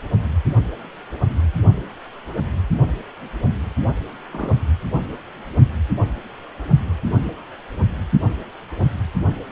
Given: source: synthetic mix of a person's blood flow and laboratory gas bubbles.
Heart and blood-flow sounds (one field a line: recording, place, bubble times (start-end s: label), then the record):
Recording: Doppler ultrasound of blood flow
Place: precordium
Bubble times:
4.32-4.54 s: bubbles
4.91-4.99 s: bubbles
From the record:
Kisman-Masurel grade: 112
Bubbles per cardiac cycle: 1 to 2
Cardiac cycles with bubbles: 1 to 10%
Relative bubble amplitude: moderate (0.250 to 0.450)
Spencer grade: 1 (occasional bubble signal discernible with the cardiac motion signal, with majority of cardiac periods free of bubbles)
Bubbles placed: only in the low amplitude regions of the cardiac cycle